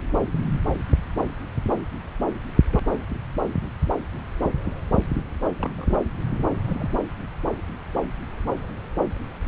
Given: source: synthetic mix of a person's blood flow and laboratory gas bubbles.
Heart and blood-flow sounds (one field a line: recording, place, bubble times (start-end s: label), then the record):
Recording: Doppler ultrasound of blood flow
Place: subclavian vein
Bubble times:
5.58-5.99 s: bubbles
6.66-6.93 s: bubbles
From the record:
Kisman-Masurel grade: 211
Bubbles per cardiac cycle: several, 3 to 8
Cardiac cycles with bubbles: 1 to 10%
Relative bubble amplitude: barely perceptible (0.100 to 0.250)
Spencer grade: 1 (occasional bubble signal discernible with the cardiac motion signal, with majority of cardiac periods free of bubbles)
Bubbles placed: anywhere in the cardiac cycle